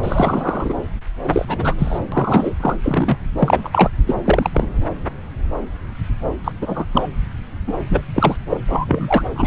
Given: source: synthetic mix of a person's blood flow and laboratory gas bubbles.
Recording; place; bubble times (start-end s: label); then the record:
Doppler ultrasound of blood flow; subclavian vein
0.03-0.73 s: bubbles
1.23-1.74 s: bubbles
1.78-1.99 s: bubbles
2.12-2.52 s: bubbles
2.60-2.77 s: bubbles
2.83-3.17 s: bubbles
3.38-3.90 s: bubbles
4.06-4.15 s: bubbles
4.25-4.50 s: bubbles
4.52-4.67 s: bubbles
6.44-6.52 s: bubbles
6.61-6.84 s: bubbles
6.93-7.07 s: bubbles
7.67-7.73 s: bubbles
7.89-8.02 s: bubbles
8.14-8.38 s: bubbles
8.49-8.57 s: bubbles
8.68-9.24 s: bubbles
9.35-9.47 s: bubbles
From the record:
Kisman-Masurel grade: 233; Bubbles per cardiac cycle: several, 3 to 8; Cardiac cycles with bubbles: 50 to 99%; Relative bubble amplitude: loud (0.450 to 0.775); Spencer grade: 3 (all of the cardiac periods contain showers or single bubble signals, but not dominating or overriding the cardiac motion signals); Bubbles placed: anywhere in the cardiac cycle